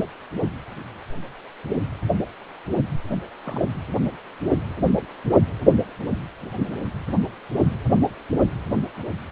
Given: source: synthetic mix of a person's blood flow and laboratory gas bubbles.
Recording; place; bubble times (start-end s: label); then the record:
Doppler ultrasound of blood flow; precordium
3.44-3.62 s: bubbles
3.65-3.69 s: bubbles
7.54-7.65 s: bubbles
From the record:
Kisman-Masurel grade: 121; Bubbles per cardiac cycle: 1 to 2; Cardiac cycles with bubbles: 10 to 50%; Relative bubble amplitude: barely perceptible (0.100 to 0.250); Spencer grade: 2 (many but less than half of the cardiac periods contain bubble signals, singularly or in groups); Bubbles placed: anywhere in the cardiac cycle